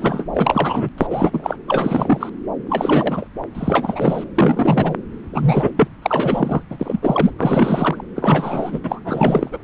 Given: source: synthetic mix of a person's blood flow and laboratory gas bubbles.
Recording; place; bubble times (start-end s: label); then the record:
Doppler ultrasound of blood flow; subclavian vein
0.00-0.24 s: bubbles
0.34-0.89 s: bubbles
0.98-1.56 s: bubbles
1.68-2.29 s: bubbles
2.69-3.27 s: bubbles
3.54-4.25 s: bubbles
4.34-4.96 s: bubbles
5.33-5.71 s: bubbles
5.76-5.88 s: bubbles
6.02-6.62 s: bubbles
6.71-7.00 s: bubbles
7.03-7.31 s: bubbles
7.38-8.03 s: bubbles
8.16-8.80 s: bubbles
8.84-9.00 s: bubbles
9.05-9.59 s: bubbles
From the record:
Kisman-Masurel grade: 342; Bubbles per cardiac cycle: rolling drumbeat, 9 or more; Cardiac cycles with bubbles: 100%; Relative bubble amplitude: moderate (0.250 to 0.450); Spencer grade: 3 (all of the cardiac periods contain showers or single bubble signals, but not dominating or overriding the cardiac motion signals); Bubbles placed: anywhere in the cardiac cycle